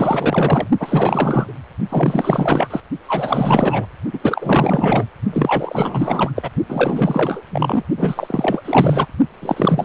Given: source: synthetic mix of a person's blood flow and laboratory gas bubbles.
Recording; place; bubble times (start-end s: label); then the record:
Doppler ultrasound of blood flow; precordium
0.00-0.67 s: bubbles
0.80-1.53 s: bubbles
1.89-2.80 s: bubbles
3.08-3.86 s: bubbles
4.12-4.19 s: bubbles
4.21-5.07 s: bubbles
5.33-6.32 s: bubbles
6.35-6.50 s: bubbles
6.68-7.41 s: bubbles
7.51-7.83 s: bubbles
7.97-8.62 s: bubbles
8.65-9.07 s: bubbles
9.42-9.85 s: bubbles
From the record:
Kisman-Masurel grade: 444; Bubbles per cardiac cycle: continuous sound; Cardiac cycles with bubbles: 100%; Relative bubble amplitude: maximal (0.775 to 0.999); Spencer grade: 4 (maximum detectable bubble signal sounding continuously throughout systole and diastole of every cardiac period, and overriding the amplitude of the normal cardiac signals); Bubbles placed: only in the low amplitude regions of the cardiac cycle